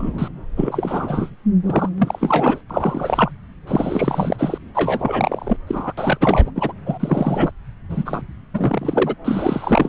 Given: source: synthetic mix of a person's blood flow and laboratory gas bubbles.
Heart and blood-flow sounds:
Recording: Doppler ultrasound of blood flow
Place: subclavian vein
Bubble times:
0.00-0.28 s: bubbles
0.56-1.30 s: bubbles
1.66-1.89 s: bubbles
1.98-2.61 s: bubbles
2.69-3.31 s: bubbles
3.67-4.58 s: bubbles
4.75-5.57 s: bubbles
5.67-5.92 s: bubbles
5.97-6.17 s: bubbles
6.21-6.50 s: bubbles
6.55-6.72 s: bubbles
6.83-7.51 s: bubbles
7.89-8.21 s: bubbles
8.54-9.14 s: bubbles
9.24-9.89 s: bubbles
From the record:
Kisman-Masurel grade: 343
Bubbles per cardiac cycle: rolling drumbeat, 9 or more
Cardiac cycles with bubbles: 100%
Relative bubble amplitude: loud (0.450 to 0.775)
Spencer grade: 3 (all of the cardiac periods contain showers or single bubble signals, but not dominating or overriding the cardiac motion signals)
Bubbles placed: anywhere in the cardiac cycle

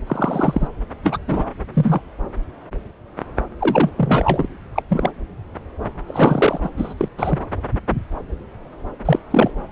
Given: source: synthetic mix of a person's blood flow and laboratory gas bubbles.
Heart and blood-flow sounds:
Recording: Doppler ultrasound of blood flow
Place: subclavian vein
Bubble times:
0.07-0.68 s: bubbles
1.02-1.18 s: bubbles
1.27-1.45 s: bubbles
1.73-2.02 s: bubbles
3.59-3.90 s: bubbles
3.97-4.48 s: bubbles
4.75-4.82 s: bubbles
4.89-5.11 s: bubbles
6.06-6.69 s: bubbles
6.77-6.94 s: bubbles
6.97-7.08 s: bubbles
7.17-7.39 s: bubbles
9.05-9.19 s: bubbles
9.31-9.51 s: bubbles
From the record:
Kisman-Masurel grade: 233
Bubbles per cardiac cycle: several, 3 to 8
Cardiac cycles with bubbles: 50 to 99%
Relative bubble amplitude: loud (0.450 to 0.775)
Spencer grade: 3 (all of the cardiac periods contain showers or single bubble signals, but not dominating or overriding the cardiac motion signals)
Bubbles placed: anywhere in the cardiac cycle

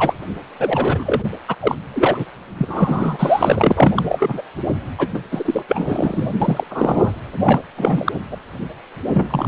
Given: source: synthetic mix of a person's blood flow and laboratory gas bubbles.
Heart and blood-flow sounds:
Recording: Doppler ultrasound of blood flow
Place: precordium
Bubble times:
0.00-0.14 s: bubbles
0.59-1.31 s: bubbles
1.48-1.56 s: bubbles
1.60-1.75 s: bubbles
1.94-2.26 s: bubbles
2.57-4.03 s: bubbles
4.09-4.43 s: bubbles
4.98-5.08 s: bubbles
5.14-5.22 s: bubbles
5.31-5.62 s: bubbles
5.68-6.32 s: bubbles
6.42-6.64 s: bubbles
6.70-7.12 s: bubbles
7.42-7.60 s: bubbles
7.77-8.12 s: bubbles
8.31-8.37 s: bubbles
9.13-9.48 s: bubbles
From the record:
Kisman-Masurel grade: 343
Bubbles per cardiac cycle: rolling drumbeat, 9 or more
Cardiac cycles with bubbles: 100%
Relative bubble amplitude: loud (0.450 to 0.775)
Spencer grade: 3 (all of the cardiac periods contain showers or single bubble signals, but not dominating or overriding the cardiac motion signals)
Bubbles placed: anywhere in the cardiac cycle

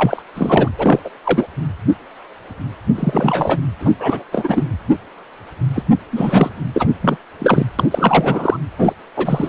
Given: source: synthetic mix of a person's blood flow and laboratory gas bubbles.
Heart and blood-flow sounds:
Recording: Doppler ultrasound of blood flow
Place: precordium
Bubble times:
0.00-0.23 s: bubbles
0.35-0.68 s: bubbles
0.78-0.99 s: bubbles
1.04-1.09 s: bubbles
1.23-1.46 s: bubbles
2.95-3.60 s: bubbles
3.80-3.96 s: bubbles
3.99-4.24 s: bubbles
4.31-4.64 s: bubbles
5.75-5.83 s: bubbles
6.10-6.50 s: bubbles
6.74-6.88 s: bubbles
7.01-7.17 s: bubbles
7.39-7.67 s: bubbles
7.79-7.87 s: bubbles
7.90-8.56 s: bubbles
8.78-8.93 s: bubbles
9.16-9.49 s: bubbles
From the record:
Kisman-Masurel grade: 333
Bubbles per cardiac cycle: rolling drumbeat, 9 or more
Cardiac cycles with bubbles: 50 to 99%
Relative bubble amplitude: loud (0.450 to 0.775)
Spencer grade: 3 (all of the cardiac periods contain showers or single bubble signals, but not dominating or overriding the cardiac motion signals)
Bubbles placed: anywhere in the cardiac cycle

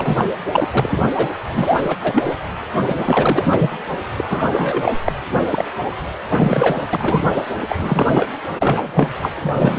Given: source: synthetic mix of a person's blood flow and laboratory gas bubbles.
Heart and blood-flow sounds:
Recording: Doppler ultrasound of blood flow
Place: precordium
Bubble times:
0.00-0.29 s: bubbles
0.52-0.68 s: bubbles
0.72-1.09 s: bubbles
1.15-1.29 s: bubbles
1.51-1.97 s: bubbles
2.03-2.36 s: bubbles
2.76-3.70 s: bubbles
4.17-4.25 s: bubbles
4.29-4.94 s: bubbles
5.04-5.12 s: bubbles
5.50-5.65 s: bubbles
6.25-6.87 s: bubbles
6.93-7.25 s: bubbles
7.33-7.42 s: bubbles
7.68-8.29 s: bubbles
8.59-9.11 s: bubbles
9.21-9.32 s: bubbles
9.35-9.79 s: bubbles
From the record:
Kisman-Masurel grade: 343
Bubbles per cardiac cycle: rolling drumbeat, 9 or more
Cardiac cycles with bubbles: 100%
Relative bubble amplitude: loud (0.450 to 0.775)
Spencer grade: 3 (all of the cardiac periods contain showers or single bubble signals, but not dominating or overriding the cardiac motion signals)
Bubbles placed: anywhere in the cardiac cycle

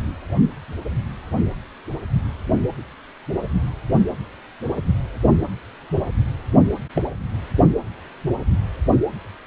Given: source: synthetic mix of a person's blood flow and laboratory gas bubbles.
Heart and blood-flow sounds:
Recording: Doppler ultrasound of blood flow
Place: precordium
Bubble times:
6.95-7.01 s: bubbles
From the record:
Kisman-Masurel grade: 122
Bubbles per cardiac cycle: 1 to 2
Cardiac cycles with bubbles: 10 to 50%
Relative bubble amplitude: moderate (0.250 to 0.450)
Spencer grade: 2 (many but less than half of the cardiac periods contain bubble signals, singularly or in groups)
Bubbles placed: only in the low amplitude regions of the cardiac cycle

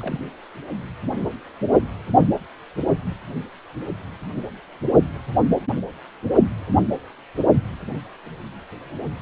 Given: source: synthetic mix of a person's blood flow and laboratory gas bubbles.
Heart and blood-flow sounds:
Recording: Doppler ultrasound of blood flow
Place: precordium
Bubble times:
0.00-0.20 s: bubbles
From the record:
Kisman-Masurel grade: 211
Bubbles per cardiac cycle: several, 3 to 8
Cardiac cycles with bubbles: 1 to 10%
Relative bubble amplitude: barely perceptible (0.100 to 0.250)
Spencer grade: 1 (occasional bubble signal discernible with the cardiac motion signal, with majority of cardiac periods free of bubbles)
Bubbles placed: only in the low amplitude regions of the cardiac cycle

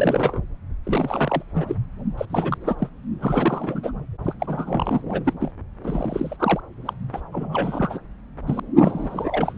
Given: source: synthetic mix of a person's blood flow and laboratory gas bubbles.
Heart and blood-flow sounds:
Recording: Doppler ultrasound of blood flow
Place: subclavian vein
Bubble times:
0.00-0.40 s: bubbles
0.84-1.42 s: bubbles
1.54-1.75 s: bubbles
2.17-2.25 s: bubbles
2.29-2.57 s: bubbles
2.61-2.75 s: bubbles
2.78-2.89 s: bubbles
3.21-3.91 s: bubbles
4.25-4.33 s: bubbles
4.39-5.01 s: bubbles
5.08-5.33 s: bubbles
5.39-5.51 s: bubbles
5.83-6.37 s: bubbles
6.39-6.60 s: bubbles
6.85-6.93 s: bubbles
7.13-7.20 s: bubbles
7.32-7.98 s: bubbles
8.47-8.60 s: bubbles
8.75-9.57 s: bubbles
From the record:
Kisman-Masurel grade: 342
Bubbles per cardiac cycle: rolling drumbeat, 9 or more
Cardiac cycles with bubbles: 100%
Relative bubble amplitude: moderate (0.250 to 0.450)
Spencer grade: 3 (all of the cardiac periods contain showers or single bubble signals, but not dominating or overriding the cardiac motion signals)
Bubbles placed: anywhere in the cardiac cycle

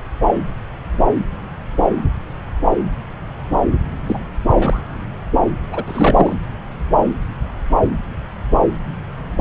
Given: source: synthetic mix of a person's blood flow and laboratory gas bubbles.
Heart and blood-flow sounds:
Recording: Doppler ultrasound of blood flow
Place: subclavian vein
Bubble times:
4.06-4.18 s: bubbles
4.49-4.80 s: bubbles
5.72-5.84 s: bubbles
5.87-6.36 s: bubbles
From the record:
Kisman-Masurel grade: 222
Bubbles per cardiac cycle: several, 3 to 8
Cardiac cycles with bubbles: 10 to 50%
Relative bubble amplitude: moderate (0.250 to 0.450)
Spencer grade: 2 (many but less than half of the cardiac periods contain bubble signals, singularly or in groups)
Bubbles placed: anywhere in the cardiac cycle

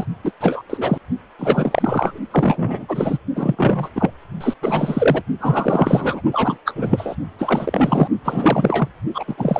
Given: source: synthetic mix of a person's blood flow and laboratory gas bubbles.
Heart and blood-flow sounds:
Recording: Doppler ultrasound of blood flow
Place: precordium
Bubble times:
0.00-0.05 s: bubbles
0.24-0.31 s: bubbles
0.41-0.61 s: bubbles
0.69-0.98 s: bubbles
1.39-2.19 s: bubbles
2.30-2.86 s: bubbles
2.88-3.18 s: bubbles
3.35-3.89 s: bubbles
3.95-4.11 s: bubbles
4.41-4.54 s: bubbles
4.62-5.22 s: bubbles
5.39-6.21 s: bubbles
6.31-6.58 s: bubbles
6.66-7.16 s: bubbles
7.38-8.08 s: bubbles
8.25-8.89 s: bubbles
9.15-9.25 s: bubbles
9.28-9.35 s: bubbles
9.38-9.60 s: bubbles
From the record:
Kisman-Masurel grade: 343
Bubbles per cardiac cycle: rolling drumbeat, 9 or more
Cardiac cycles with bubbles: 100%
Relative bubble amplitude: loud (0.450 to 0.775)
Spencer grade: 3 (all of the cardiac periods contain showers or single bubble signals, but not dominating or overriding the cardiac motion signals)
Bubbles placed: only in the low amplitude regions of the cardiac cycle

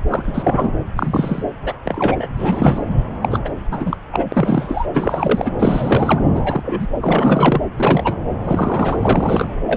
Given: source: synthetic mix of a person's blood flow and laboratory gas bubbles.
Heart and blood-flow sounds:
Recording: Doppler ultrasound of blood flow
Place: subclavian vein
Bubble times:
0.08-0.72 s: bubbles
0.96-1.44 s: bubbles
1.64-1.77 s: bubbles
1.84-2.28 s: bubbles
2.36-2.85 s: bubbles
3.22-3.39 s: bubbles
3.45-3.49 s: bubbles
3.71-3.97 s: bubbles
4.12-4.25 s: bubbles
4.32-4.87 s: bubbles
4.94-5.52 s: bubbles
5.59-6.21 s: bubbles
6.33-6.87 s: bubbles
7.01-7.61 s: bubbles
7.77-8.16 s: bubbles
8.44-9.49 s: bubbles
9.66-9.77 s: bubbles
From the record:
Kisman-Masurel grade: 243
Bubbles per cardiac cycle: several, 3 to 8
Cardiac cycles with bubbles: 100%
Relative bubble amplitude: loud (0.450 to 0.775)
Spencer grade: 3 (all of the cardiac periods contain showers or single bubble signals, but not dominating or overriding the cardiac motion signals)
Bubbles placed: anywhere in the cardiac cycle

